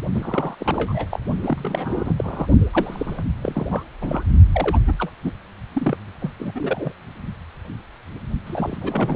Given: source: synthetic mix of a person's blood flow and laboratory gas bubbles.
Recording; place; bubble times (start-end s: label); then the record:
Doppler ultrasound of blood flow; precordium
0.12-0.54 s: bubbles
0.59-1.20 s: bubbles
1.42-2.14 s: bubbles
2.18-2.46 s: bubbles
2.71-3.24 s: bubbles
3.42-3.66 s: bubbles
3.70-3.83 s: bubbles
4.00-4.23 s: bubbles
4.53-4.80 s: bubbles
4.87-5.12 s: bubbles
5.23-5.34 s: bubbles
5.73-5.97 s: bubbles
6.20-6.30 s: bubbles
6.40-6.52 s: bubbles
6.54-6.92 s: bubbles
8.46-8.78 s: bubbles
8.80-9.16 s: bubbles
From the record:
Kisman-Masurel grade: 332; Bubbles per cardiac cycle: rolling drumbeat, 9 or more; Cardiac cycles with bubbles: 50 to 99%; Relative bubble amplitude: moderate (0.250 to 0.450); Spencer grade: 3 (all of the cardiac periods contain showers or single bubble signals, but not dominating or overriding the cardiac motion signals); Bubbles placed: only in the low amplitude regions of the cardiac cycle